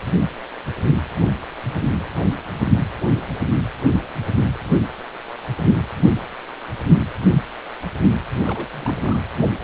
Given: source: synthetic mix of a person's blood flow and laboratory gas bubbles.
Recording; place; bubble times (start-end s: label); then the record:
Doppler ultrasound of blood flow; precordium
8.45-8.68 s: bubbles
8.71-8.98 s: bubbles
9.01-9.17 s: bubbles
From the record:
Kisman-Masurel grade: 211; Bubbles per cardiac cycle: several, 3 to 8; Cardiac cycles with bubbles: 1 to 10%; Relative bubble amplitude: barely perceptible (0.100 to 0.250); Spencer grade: 1 (occasional bubble signal discernible with the cardiac motion signal, with majority of cardiac periods free of bubbles); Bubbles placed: anywhere in the cardiac cycle